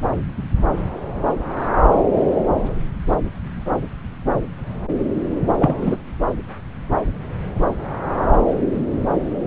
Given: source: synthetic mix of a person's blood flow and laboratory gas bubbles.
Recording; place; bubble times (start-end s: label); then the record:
Doppler ultrasound of blood flow; subclavian vein
5.58-5.97 s: bubbles
From the record:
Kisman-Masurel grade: 213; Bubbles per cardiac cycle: several, 3 to 8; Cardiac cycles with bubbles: 1 to 10%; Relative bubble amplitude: loud (0.450 to 0.775); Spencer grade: 1 (occasional bubble signal discernible with the cardiac motion signal, with majority of cardiac periods free of bubbles); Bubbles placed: anywhere in the cardiac cycle